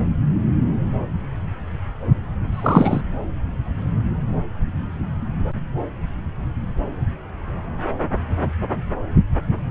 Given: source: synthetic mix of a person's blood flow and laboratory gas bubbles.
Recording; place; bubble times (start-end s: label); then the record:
Doppler ultrasound of blood flow; subclavian vein
2.52-3.01 s: bubbles
From the record:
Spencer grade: 1 (occasional bubble signal discernible with the cardiac motion signal, with majority of cardiac periods free of bubbles); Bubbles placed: anywhere in the cardiac cycle